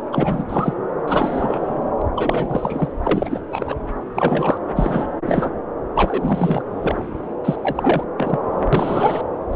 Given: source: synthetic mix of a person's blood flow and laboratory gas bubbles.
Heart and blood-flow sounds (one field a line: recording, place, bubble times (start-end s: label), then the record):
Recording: Doppler ultrasound of blood flow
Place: subclavian vein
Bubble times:
0.12-0.44 s: bubbles
0.49-0.74 s: bubbles
1.07-1.92 s: bubbles
2.00-2.02 s: bubbles
2.15-2.92 s: bubbles
3.03-3.40 s: bubbles
3.51-3.76 s: bubbles
4.14-4.57 s: bubbles
4.75-5.07 s: bubbles
5.25-5.50 s: bubbles
5.94-6.62 s: bubbles
6.81-6.95 s: bubbles
7.43-8.04 s: bubbles
8.17-8.39 s: bubbles
8.72-9.21 s: bubbles
9.49-9.55 s: bubbles
From the record:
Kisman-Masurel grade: 343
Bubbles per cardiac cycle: rolling drumbeat, 9 or more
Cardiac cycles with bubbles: 100%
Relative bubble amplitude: loud (0.450 to 0.775)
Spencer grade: 3 (all of the cardiac periods contain showers or single bubble signals, but not dominating or overriding the cardiac motion signals)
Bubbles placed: anywhere in the cardiac cycle